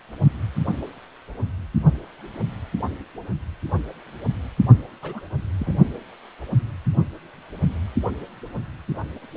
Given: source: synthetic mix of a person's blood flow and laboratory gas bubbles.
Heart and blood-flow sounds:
Doppler ultrasound of blood flow; precordium
5.02-5.21 s: bubbles
5.59-5.76 s: bubbles
From the record:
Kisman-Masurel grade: 121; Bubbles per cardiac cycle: 1 to 2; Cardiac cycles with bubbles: 10 to 50%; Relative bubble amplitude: barely perceptible (0.100 to 0.250); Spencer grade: 2 (many but less than half of the cardiac periods contain bubble signals, singularly or in groups); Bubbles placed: only in the low amplitude regions of the cardiac cycle

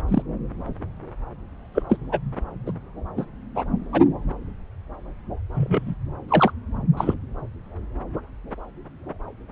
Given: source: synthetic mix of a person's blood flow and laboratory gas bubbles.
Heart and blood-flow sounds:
Doppler ultrasound of blood flow; subclavian vein
0.08-0.22 s: bubbles
1.74-1.83 s: bubbles
1.89-1.98 s: bubbles
2.11-2.19 s: bubbles
2.66-2.71 s: bubbles
3.17-3.25 s: bubbles
3.55-3.64 s: bubbles
3.92-4.09 s: bubbles
5.54-5.96 s: bubbles
6.29-6.51 s: bubbles
6.96-7.14 s: bubbles
From the record:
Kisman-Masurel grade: 123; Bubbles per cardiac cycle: 1 to 2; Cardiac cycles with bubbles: 10 to 50%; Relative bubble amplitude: loud (0.450 to 0.775); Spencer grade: 2 (many but less than half of the cardiac periods contain bubble signals, singularly or in groups); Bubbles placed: anywhere in the cardiac cycle

